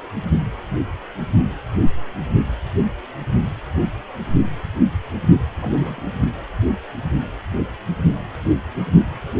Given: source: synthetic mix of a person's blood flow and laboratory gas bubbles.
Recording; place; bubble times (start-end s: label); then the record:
Doppler ultrasound of blood flow; precordium
5.60-6.10 s: bubbles
From the record:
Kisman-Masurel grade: 111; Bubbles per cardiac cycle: 1 to 2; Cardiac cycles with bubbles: 1 to 10%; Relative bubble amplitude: barely perceptible (0.100 to 0.250); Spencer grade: 1 (occasional bubble signal discernible with the cardiac motion signal, with majority of cardiac periods free of bubbles); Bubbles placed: only in the low amplitude regions of the cardiac cycle